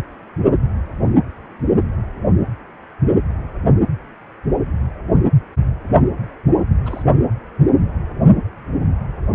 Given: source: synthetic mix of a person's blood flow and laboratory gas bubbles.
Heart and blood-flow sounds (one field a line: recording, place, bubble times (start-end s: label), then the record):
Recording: Doppler ultrasound of blood flow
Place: precordium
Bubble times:
6.85-7.03 s: bubbles
From the record:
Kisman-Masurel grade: 111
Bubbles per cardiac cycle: 1 to 2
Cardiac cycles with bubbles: 1 to 10%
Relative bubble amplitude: barely perceptible (0.100 to 0.250)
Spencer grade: 1 (occasional bubble signal discernible with the cardiac motion signal, with majority of cardiac periods free of bubbles)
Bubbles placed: anywhere in the cardiac cycle